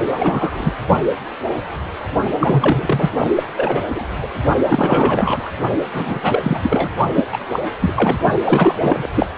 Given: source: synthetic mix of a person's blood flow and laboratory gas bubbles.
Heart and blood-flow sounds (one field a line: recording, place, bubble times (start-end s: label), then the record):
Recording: Doppler ultrasound of blood flow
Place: precordium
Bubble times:
0.00-0.03 s: bubbles
0.11-0.73 s: bubbles
2.39-3.11 s: bubbles
3.17-3.27 s: bubbles
3.35-3.43 s: bubbles
3.56-3.84 s: bubbles
3.95-4.05 s: bubbles
4.22-4.28 s: bubbles
4.68-5.52 s: bubbles
5.92-6.59 s: bubbles
6.62-6.90 s: bubbles
7.14-7.25 s: bubbles
7.31-7.38 s: bubbles
7.51-7.59 s: bubbles
7.81-7.93 s: bubbles
7.96-8.19 s: bubbles
8.45-9.07 s: bubbles
9.15-9.26 s: bubbles
From the record:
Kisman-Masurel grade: 333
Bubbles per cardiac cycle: rolling drumbeat, 9 or more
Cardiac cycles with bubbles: 50 to 99%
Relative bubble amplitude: loud (0.450 to 0.775)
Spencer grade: 3 (all of the cardiac periods contain showers or single bubble signals, but not dominating or overriding the cardiac motion signals)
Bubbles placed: only in the low amplitude regions of the cardiac cycle